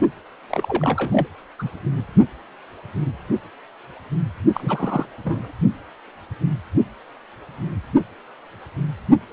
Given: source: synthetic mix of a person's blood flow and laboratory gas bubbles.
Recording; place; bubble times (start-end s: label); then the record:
Doppler ultrasound of blood flow; precordium
0.49-1.27 s: bubbles
1.58-1.71 s: bubbles
4.54-5.06 s: bubbles
5.23-5.51 s: bubbles
From the record:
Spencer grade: 2 (many but less than half of the cardiac periods contain bubble signals, singularly or in groups); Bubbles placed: only in the low amplitude regions of the cardiac cycle